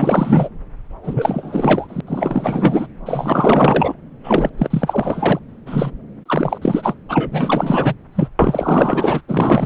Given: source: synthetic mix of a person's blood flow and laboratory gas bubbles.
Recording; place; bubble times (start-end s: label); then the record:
Doppler ultrasound of blood flow; subclavian vein
0.00-0.48 s: bubbles
1.03-2.00 s: bubbles
2.06-2.87 s: bubbles
3.05-3.94 s: bubbles
4.23-4.50 s: bubbles
4.58-5.39 s: bubbles
5.66-5.91 s: bubbles
6.25-6.58 s: bubbles
6.62-6.95 s: bubbles
7.09-7.95 s: bubbles
8.15-8.28 s: bubbles
8.39-9.21 s: bubbles
9.28-9.66 s: bubbles
From the record:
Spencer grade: 4 (maximum detectable bubble signal sounding continuously throughout systole and diastole of every cardiac period, and overriding the amplitude of the normal cardiac signals); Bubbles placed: anywhere in the cardiac cycle